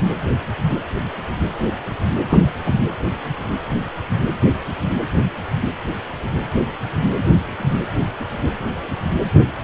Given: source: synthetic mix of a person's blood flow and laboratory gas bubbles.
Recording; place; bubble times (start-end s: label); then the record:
Doppler ultrasound of blood flow; precordium
2.30-2.43 s: bubbles
2.66-2.75 s: bubbles
From the record:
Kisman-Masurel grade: 113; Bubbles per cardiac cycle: 1 to 2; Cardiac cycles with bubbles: 1 to 10%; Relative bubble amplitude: loud (0.450 to 0.775); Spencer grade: 1 (occasional bubble signal discernible with the cardiac motion signal, with majority of cardiac periods free of bubbles); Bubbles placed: anywhere in the cardiac cycle